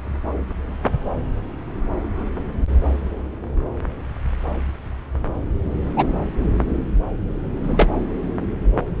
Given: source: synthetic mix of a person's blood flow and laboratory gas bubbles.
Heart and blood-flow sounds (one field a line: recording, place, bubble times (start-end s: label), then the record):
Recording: Doppler ultrasound of blood flow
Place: subclavian vein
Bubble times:
5.96-6.07 s: bubbles
7.63-7.90 s: bubbles
From the record:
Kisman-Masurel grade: 123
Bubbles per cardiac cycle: 1 to 2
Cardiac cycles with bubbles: 10 to 50%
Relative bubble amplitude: loud (0.450 to 0.775)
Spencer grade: 2 (many but less than half of the cardiac periods contain bubble signals, singularly or in groups)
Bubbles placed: anywhere in the cardiac cycle